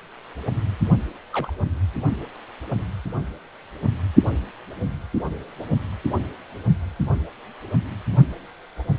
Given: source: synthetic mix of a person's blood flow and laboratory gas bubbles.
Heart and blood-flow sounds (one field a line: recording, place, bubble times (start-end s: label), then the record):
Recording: Doppler ultrasound of blood flow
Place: precordium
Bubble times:
1.32-1.51 s: bubbles
From the record:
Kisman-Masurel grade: 111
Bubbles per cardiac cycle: 1 to 2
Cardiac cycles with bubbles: 1 to 10%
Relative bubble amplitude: barely perceptible (0.100 to 0.250)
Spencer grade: 1 (occasional bubble signal discernible with the cardiac motion signal, with majority of cardiac periods free of bubbles)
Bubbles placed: only in the low amplitude regions of the cardiac cycle